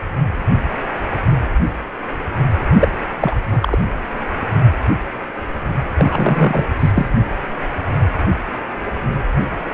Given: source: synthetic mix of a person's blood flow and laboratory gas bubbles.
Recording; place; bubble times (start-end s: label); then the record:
Doppler ultrasound of blood flow; precordium
2.71-2.89 s: bubbles
3.20-3.35 s: bubbles
3.51-3.59 s: bubbles
3.62-3.76 s: bubbles
5.98-6.65 s: bubbles
6.79-6.92 s: bubbles
6.95-7.06 s: bubbles
From the record:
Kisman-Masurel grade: 223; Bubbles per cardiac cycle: several, 3 to 8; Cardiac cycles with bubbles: 10 to 50%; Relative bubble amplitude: loud (0.450 to 0.775); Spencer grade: 2 (many but less than half of the cardiac periods contain bubble signals, singularly or in groups); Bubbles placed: anywhere in the cardiac cycle